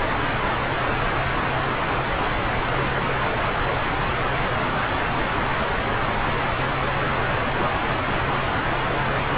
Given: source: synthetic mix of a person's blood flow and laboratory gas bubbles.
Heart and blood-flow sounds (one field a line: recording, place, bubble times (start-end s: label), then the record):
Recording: Doppler ultrasound of blood flow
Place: subclavian vein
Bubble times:
3.06-3.12 s: bubbles
7.55-7.67 s: bubbles
From the record:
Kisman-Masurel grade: 121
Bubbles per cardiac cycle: 1 to 2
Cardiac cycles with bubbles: 10 to 50%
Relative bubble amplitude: barely perceptible (0.100 to 0.250)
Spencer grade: 2 (many but less than half of the cardiac periods contain bubble signals, singularly or in groups)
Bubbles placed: anywhere in the cardiac cycle